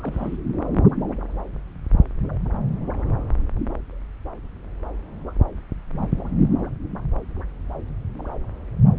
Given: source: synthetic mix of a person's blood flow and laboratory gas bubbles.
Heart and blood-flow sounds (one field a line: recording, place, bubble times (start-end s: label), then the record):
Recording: Doppler ultrasound of blood flow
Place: subclavian vein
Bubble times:
0.00-0.36 s: bubbles
From the record:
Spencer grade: 1 (occasional bubble signal discernible with the cardiac motion signal, with majority of cardiac periods free of bubbles)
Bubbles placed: anywhere in the cardiac cycle